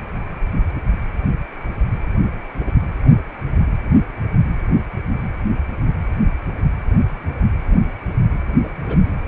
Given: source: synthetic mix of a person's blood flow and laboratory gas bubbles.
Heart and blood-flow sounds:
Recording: Doppler ultrasound of blood flow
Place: precordium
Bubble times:
6.46-6.50 s: bubbles
6.58-6.62 s: bubbles
8.64-8.68 s: bubbles
8.76-9.07 s: bubbles
From the record:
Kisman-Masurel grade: 121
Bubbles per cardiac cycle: 1 to 2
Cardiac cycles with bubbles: 10 to 50%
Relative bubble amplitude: barely perceptible (0.100 to 0.250)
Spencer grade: 2 (many but less than half of the cardiac periods contain bubble signals, singularly or in groups)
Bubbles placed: anywhere in the cardiac cycle

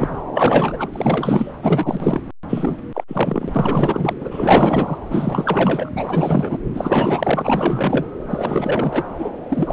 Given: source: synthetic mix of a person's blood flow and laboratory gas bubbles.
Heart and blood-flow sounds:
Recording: Doppler ultrasound of blood flow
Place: subclavian vein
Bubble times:
0.00-0.22 s: bubbles
0.33-0.89 s: bubbles
0.93-1.54 s: bubbles
1.61-2.21 s: bubbles
2.48-2.77 s: bubbles
2.94-3.04 s: bubbles
3.08-4.15 s: bubbles
4.20-4.98 s: bubbles
5.10-5.91 s: bubbles
5.95-6.58 s: bubbles
6.74-8.06 s: bubbles
8.29-9.04 s: bubbles
9.18-9.30 s: bubbles
9.48-9.73 s: bubbles
From the record:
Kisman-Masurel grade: 444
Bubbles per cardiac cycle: continuous sound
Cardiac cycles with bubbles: 100%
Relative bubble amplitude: maximal (0.775 to 0.999)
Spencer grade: 4 (maximum detectable bubble signal sounding continuously throughout systole and diastole of every cardiac period, and overriding the amplitude of the normal cardiac signals)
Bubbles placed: anywhere in the cardiac cycle

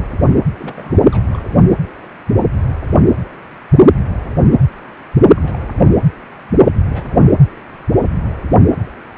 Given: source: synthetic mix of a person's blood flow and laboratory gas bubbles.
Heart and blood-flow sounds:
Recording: Doppler ultrasound of blood flow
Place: precordium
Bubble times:
0.58-1.02 s: bubbles
1.12-1.24 s: bubbles
1.33-1.43 s: bubbles
1.50-1.75 s: bubbles
5.36-5.58 s: bubbles
5.61-5.71 s: bubbles
5.75-5.84 s: bubbles
5.87-5.89 s: bubbles
6.88-7.21 s: bubbles
From the record:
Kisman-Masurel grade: 221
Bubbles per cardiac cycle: several, 3 to 8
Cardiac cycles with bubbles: 10 to 50%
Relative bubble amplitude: barely perceptible (0.100 to 0.250)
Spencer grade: 2 (many but less than half of the cardiac periods contain bubble signals, singularly or in groups)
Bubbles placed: anywhere in the cardiac cycle

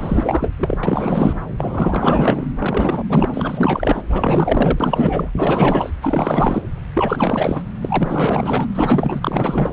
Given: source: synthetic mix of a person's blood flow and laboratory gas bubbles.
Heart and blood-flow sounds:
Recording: Doppler ultrasound of blood flow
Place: subclavian vein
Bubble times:
0.00-0.52 s: bubbles
0.59-0.78 s: bubbles
0.83-1.39 s: bubbles
1.57-2.47 s: bubbles
2.58-3.04 s: bubbles
3.08-4.03 s: bubbles
4.09-5.31 s: bubbles
5.35-5.90 s: bubbles
6.01-6.62 s: bubbles
6.94-7.62 s: bubbles
7.81-8.68 s: bubbles
8.74-9.73 s: bubbles
From the record:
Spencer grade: 4 (maximum detectable bubble signal sounding continuously throughout systole and diastole of every cardiac period, and overriding the amplitude of the normal cardiac signals)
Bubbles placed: anywhere in the cardiac cycle

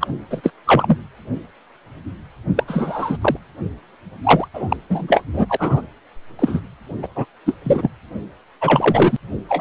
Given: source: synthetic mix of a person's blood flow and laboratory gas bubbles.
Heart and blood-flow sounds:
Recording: Doppler ultrasound of blood flow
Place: precordium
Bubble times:
0.00-0.08 s: bubbles
0.30-0.52 s: bubbles
0.66-0.98 s: bubbles
2.56-2.63 s: bubbles
2.67-3.17 s: bubbles
3.21-3.37 s: bubbles
4.23-4.47 s: bubbles
4.54-4.76 s: bubbles
4.89-5.22 s: bubbles
5.33-5.82 s: bubbles
6.39-6.61 s: bubbles
7.02-7.08 s: bubbles
7.15-7.25 s: bubbles
7.45-7.54 s: bubbles
7.64-7.89 s: bubbles
8.61-9.17 s: bubbles
9.49-9.61 s: bubbles
From the record:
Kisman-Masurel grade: 233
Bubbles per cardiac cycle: several, 3 to 8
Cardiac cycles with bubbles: 50 to 99%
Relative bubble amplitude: loud (0.450 to 0.775)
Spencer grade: 3 (all of the cardiac periods contain showers or single bubble signals, but not dominating or overriding the cardiac motion signals)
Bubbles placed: anywhere in the cardiac cycle

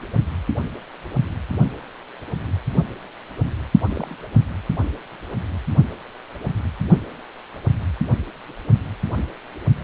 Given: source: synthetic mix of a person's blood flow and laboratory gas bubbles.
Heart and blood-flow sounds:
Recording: Doppler ultrasound of blood flow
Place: precordium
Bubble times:
3.91-4.16 s: bubbles
From the record:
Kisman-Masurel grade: 111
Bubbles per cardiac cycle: 1 to 2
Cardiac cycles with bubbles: 1 to 10%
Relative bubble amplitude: barely perceptible (0.100 to 0.250)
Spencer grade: 1 (occasional bubble signal discernible with the cardiac motion signal, with majority of cardiac periods free of bubbles)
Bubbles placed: only in the low amplitude regions of the cardiac cycle

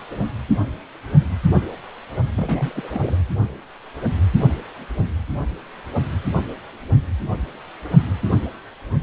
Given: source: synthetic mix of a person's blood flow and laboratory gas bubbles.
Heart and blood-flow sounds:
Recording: Doppler ultrasound of blood flow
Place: precordium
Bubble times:
2.36-2.72 s: bubbles
2.75-3.17 s: bubbles
From the record:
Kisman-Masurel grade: 221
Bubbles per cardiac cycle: several, 3 to 8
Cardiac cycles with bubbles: 10 to 50%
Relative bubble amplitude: barely perceptible (0.100 to 0.250)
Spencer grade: 2 (many but less than half of the cardiac periods contain bubble signals, singularly or in groups)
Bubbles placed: only in the low amplitude regions of the cardiac cycle

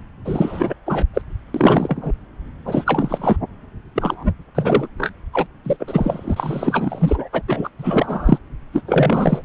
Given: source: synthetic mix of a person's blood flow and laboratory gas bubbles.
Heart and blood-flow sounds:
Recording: Doppler ultrasound of blood flow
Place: subclavian vein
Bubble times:
0.25-0.74 s: bubbles
0.86-1.06 s: bubbles
1.14-1.22 s: bubbles
1.54-2.12 s: bubbles
2.65-3.37 s: bubbles
3.95-4.33 s: bubbles
4.54-4.88 s: bubbles
4.97-5.10 s: bubbles
5.32-5.46 s: bubbles
5.64-5.76 s: bubbles
5.79-7.28 s: bubbles
7.32-7.42 s: bubbles
7.47-7.69 s: bubbles
7.78-8.38 s: bubbles
8.72-8.81 s: bubbles
8.87-9.43 s: bubbles
From the record:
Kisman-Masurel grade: 343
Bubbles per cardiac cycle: rolling drumbeat, 9 or more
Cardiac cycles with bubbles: 100%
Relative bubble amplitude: loud (0.450 to 0.775)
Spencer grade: 3 (all of the cardiac periods contain showers or single bubble signals, but not dominating or overriding the cardiac motion signals)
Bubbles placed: anywhere in the cardiac cycle

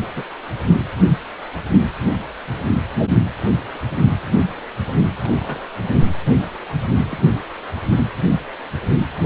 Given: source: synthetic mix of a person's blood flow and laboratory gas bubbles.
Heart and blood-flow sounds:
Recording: Doppler ultrasound of blood flow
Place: precordium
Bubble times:
0.15-0.24 s: bubbles
3.74-3.81 s: bubbles
5.22-5.60 s: bubbles
7.04-7.23 s: bubbles
From the record:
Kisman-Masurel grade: 121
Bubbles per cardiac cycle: 1 to 2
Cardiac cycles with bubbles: 10 to 50%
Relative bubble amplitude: barely perceptible (0.100 to 0.250)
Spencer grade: 2 (many but less than half of the cardiac periods contain bubble signals, singularly or in groups)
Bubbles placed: only in the low amplitude regions of the cardiac cycle

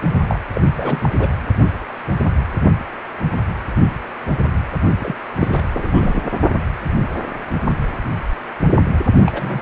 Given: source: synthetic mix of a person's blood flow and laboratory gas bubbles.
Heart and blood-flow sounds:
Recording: Doppler ultrasound of blood flow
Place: precordium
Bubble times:
0.29-0.40 s: bubbles
0.54-0.61 s: bubbles
0.76-1.09 s: bubbles
1.20-1.29 s: bubbles
4.99-5.14 s: bubbles
5.38-5.65 s: bubbles
5.73-6.31 s: bubbles
9.26-9.62 s: bubbles
From the record:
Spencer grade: 3 (all of the cardiac periods contain showers or single bubble signals, but not dominating or overriding the cardiac motion signals)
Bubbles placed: only in the low amplitude regions of the cardiac cycle

